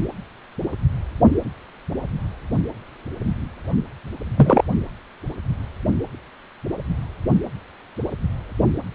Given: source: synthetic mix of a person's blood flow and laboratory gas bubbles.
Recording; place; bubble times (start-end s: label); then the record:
Doppler ultrasound of blood flow; precordium
4.36-4.63 s: bubbles
From the record:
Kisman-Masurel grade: 123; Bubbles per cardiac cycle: 1 to 2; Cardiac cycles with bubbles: 10 to 50%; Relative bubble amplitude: loud (0.450 to 0.775); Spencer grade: 2 (many but less than half of the cardiac periods contain bubble signals, singularly or in groups); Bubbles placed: only in the low amplitude regions of the cardiac cycle